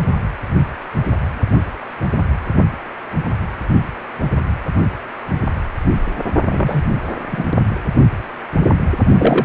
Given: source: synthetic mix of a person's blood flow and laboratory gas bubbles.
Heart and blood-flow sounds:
Doppler ultrasound of blood flow; precordium
6.45-6.82 s: bubbles
7.31-7.44 s: bubbles
9.18-9.45 s: bubbles
From the record:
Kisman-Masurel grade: 223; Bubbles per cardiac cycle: several, 3 to 8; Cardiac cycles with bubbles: 10 to 50%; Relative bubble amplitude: loud (0.450 to 0.775); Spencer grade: 2 (many but less than half of the cardiac periods contain bubble signals, singularly or in groups); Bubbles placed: only in the low amplitude regions of the cardiac cycle

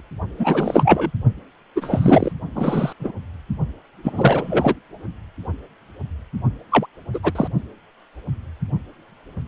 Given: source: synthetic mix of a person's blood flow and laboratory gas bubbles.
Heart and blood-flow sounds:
Doppler ultrasound of blood flow; precordium
0.39-1.10 s: bubbles
1.75-2.32 s: bubbles
2.55-2.93 s: bubbles
3.00-3.12 s: bubbles
4.04-4.74 s: bubbles
6.71-6.87 s: bubbles
7.13-7.20 s: bubbles
7.23-7.48 s: bubbles
From the record:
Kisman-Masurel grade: 233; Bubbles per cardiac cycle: several, 3 to 8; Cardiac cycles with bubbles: 50 to 99%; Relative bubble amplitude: loud (0.450 to 0.775); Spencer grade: 3 (all of the cardiac periods contain showers or single bubble signals, but not dominating or overriding the cardiac motion signals); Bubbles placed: only in the low amplitude regions of the cardiac cycle

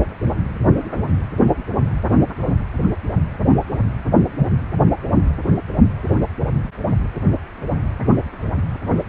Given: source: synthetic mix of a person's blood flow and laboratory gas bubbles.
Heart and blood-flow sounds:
Doppler ultrasound of blood flow; precordium
no bubbles
From the record:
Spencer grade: 0 (complete lack of bubble signals)

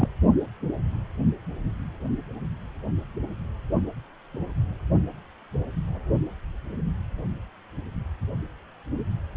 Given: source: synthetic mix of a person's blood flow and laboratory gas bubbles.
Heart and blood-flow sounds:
Doppler ultrasound of blood flow; precordium
0.00-0.10 s: bubbles
From the record:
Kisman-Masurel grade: 112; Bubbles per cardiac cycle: 1 to 2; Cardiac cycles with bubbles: 1 to 10%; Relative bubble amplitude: moderate (0.250 to 0.450); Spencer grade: 1 (occasional bubble signal discernible with the cardiac motion signal, with majority of cardiac periods free of bubbles); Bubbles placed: only in the low amplitude regions of the cardiac cycle

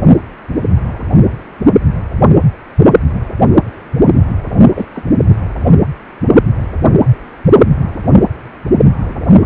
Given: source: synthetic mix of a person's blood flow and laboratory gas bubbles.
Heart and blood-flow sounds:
Doppler ultrasound of blood flow; precordium
4.75-4.85 s: bubbles
4.94-5.05 s: bubbles
From the record:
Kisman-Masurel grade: 212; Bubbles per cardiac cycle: several, 3 to 8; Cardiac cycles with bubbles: 1 to 10%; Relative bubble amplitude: moderate (0.250 to 0.450); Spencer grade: 1 (occasional bubble signal discernible with the cardiac motion signal, with majority of cardiac periods free of bubbles); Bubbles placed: anywhere in the cardiac cycle

